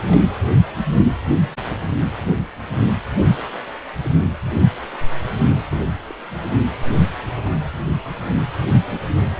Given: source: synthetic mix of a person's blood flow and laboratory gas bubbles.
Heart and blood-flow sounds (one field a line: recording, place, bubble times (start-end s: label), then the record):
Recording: Doppler ultrasound of blood flow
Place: precordium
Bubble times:
0.08-0.21 s: bubbles
4.03-4.11 s: bubbles
5.71-5.82 s: bubbles
6.07-6.15 s: bubbles
From the record:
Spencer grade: 2 (many but less than half of the cardiac periods contain bubble signals, singularly or in groups)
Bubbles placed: anywhere in the cardiac cycle